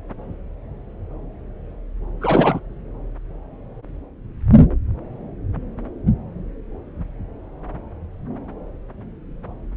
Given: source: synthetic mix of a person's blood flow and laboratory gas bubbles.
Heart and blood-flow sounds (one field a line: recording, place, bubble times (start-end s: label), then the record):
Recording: Doppler ultrasound of blood flow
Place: subclavian vein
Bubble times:
2.21-2.60 s: bubbles
From the record:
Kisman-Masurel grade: 213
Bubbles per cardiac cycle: several, 3 to 8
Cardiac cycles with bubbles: 1 to 10%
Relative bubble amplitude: loud (0.450 to 0.775)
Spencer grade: 1 (occasional bubble signal discernible with the cardiac motion signal, with majority of cardiac periods free of bubbles)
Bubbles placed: anywhere in the cardiac cycle